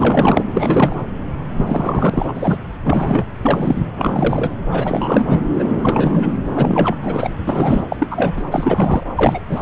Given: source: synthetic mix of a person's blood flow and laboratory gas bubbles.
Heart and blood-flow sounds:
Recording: Doppler ultrasound of blood flow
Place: subclavian vein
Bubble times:
0.00-0.44 s: bubbles
0.52-0.98 s: bubbles
1.56-2.58 s: bubbles
2.83-3.25 s: bubbles
3.42-3.88 s: bubbles
3.96-4.52 s: bubbles
4.71-5.42 s: bubbles
5.55-5.75 s: bubbles
5.82-6.38 s: bubbles
6.54-6.95 s: bubbles
7.02-7.29 s: bubbles
7.47-7.86 s: bubbles
7.89-7.96 s: bubbles
7.99-8.07 s: bubbles
8.11-8.43 s: bubbles
8.51-9.04 s: bubbles
9.15-9.41 s: bubbles
9.48-9.62 s: bubbles
From the record:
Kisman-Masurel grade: 342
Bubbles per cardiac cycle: rolling drumbeat, 9 or more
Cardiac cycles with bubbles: 100%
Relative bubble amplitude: moderate (0.250 to 0.450)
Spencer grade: 3 (all of the cardiac periods contain showers or single bubble signals, but not dominating or overriding the cardiac motion signals)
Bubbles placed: anywhere in the cardiac cycle

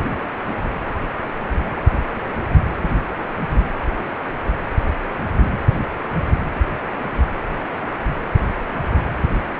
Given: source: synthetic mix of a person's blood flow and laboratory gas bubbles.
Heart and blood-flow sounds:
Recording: Doppler ultrasound of blood flow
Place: precordium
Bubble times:
5.37-5.59 s: bubbles
From the record:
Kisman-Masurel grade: 112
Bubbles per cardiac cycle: 1 to 2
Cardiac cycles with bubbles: 1 to 10%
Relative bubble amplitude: moderate (0.250 to 0.450)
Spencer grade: 1 (occasional bubble signal discernible with the cardiac motion signal, with majority of cardiac periods free of bubbles)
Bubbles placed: anywhere in the cardiac cycle

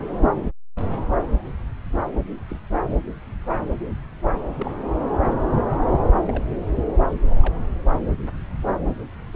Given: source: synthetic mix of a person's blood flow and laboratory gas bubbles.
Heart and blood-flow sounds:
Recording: Doppler ultrasound of blood flow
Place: subclavian vein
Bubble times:
2.49-2.60 s: bubbles
4.58-4.72 s: bubbles
6.28-6.44 s: bubbles
7.42-7.58 s: bubbles
From the record:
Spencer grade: 2 (many but less than half of the cardiac periods contain bubble signals, singularly or in groups)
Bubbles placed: anywhere in the cardiac cycle

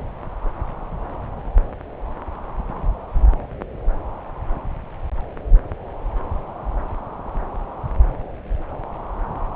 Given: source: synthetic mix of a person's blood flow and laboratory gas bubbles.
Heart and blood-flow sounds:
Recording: Doppler ultrasound of blood flow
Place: subclavian vein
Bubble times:
no bubbles
From the record:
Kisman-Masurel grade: 000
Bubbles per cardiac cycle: 0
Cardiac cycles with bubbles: 0%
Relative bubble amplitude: no bubbles discernible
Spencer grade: 0 (complete lack of bubble signals)

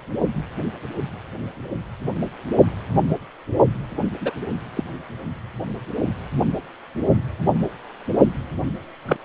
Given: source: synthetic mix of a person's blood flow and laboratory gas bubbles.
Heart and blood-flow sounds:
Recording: Doppler ultrasound of blood flow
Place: precordium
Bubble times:
4.21-4.33 s: bubbles
4.77-4.84 s: bubbles
9.05-9.16 s: bubbles
From the record:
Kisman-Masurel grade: 122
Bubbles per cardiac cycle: 1 to 2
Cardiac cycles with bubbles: 10 to 50%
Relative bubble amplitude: moderate (0.250 to 0.450)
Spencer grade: 2 (many but less than half of the cardiac periods contain bubble signals, singularly or in groups)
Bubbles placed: only in the low amplitude regions of the cardiac cycle

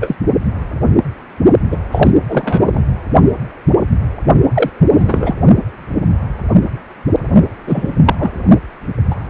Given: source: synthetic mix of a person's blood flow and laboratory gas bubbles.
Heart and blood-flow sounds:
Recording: Doppler ultrasound of blood flow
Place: precordium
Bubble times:
0.00-0.15 s: bubbles
1.71-1.77 s: bubbles
1.91-2.11 s: bubbles
2.28-2.83 s: bubbles
4.54-4.69 s: bubbles
4.92-5.35 s: bubbles
7.67-7.96 s: bubbles
8.06-8.16 s: bubbles
8.19-8.32 s: bubbles
9.11-9.16 s: bubbles
From the record:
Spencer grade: 2 (many but less than half of the cardiac periods contain bubble signals, singularly or in groups)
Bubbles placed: only in the low amplitude regions of the cardiac cycle

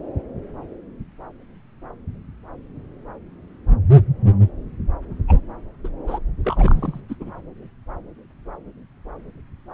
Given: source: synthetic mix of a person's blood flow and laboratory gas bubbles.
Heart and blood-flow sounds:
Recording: Doppler ultrasound of blood flow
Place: subclavian vein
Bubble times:
5.27-5.40 s: bubbles
5.84-5.88 s: bubbles
6.07-6.19 s: bubbles
6.44-7.00 s: bubbles
7.08-7.15 s: bubbles
7.20-7.31 s: bubbles
From the record:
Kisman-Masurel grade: 221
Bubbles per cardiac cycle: several, 3 to 8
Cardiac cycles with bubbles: 10 to 50%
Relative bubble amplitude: barely perceptible (0.100 to 0.250)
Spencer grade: 2 (many but less than half of the cardiac periods contain bubble signals, singularly or in groups)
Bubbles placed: anywhere in the cardiac cycle

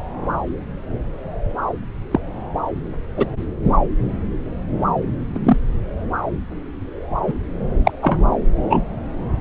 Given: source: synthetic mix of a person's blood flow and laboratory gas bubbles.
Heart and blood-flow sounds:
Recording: Doppler ultrasound of blood flow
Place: subclavian vein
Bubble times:
2.11-2.21 s: bubbles
3.17-3.26 s: bubbles
5.34-5.40 s: bubbles
5.43-5.57 s: bubbles
7.27-7.33 s: bubbles
7.85-7.91 s: bubbles
8.02-8.18 s: bubbles
8.70-8.81 s: bubbles
From the record:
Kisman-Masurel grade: 123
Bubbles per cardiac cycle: 1 to 2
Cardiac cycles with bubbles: 10 to 50%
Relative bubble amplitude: loud (0.450 to 0.775)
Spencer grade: 2 (many but less than half of the cardiac periods contain bubble signals, singularly or in groups)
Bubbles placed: anywhere in the cardiac cycle

